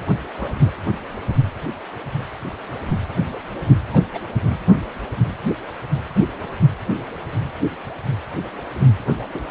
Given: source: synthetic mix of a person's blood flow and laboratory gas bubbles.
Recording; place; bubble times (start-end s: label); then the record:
Doppler ultrasound of blood flow; precordium
0.38-0.69 s: bubbles
3.92-4.08 s: bubbles
4.14-4.20 s: bubbles
9.06-9.14 s: bubbles
9.32-9.41 s: bubbles
From the record:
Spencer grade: 2 (many but less than half of the cardiac periods contain bubble signals, singularly or in groups); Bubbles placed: anywhere in the cardiac cycle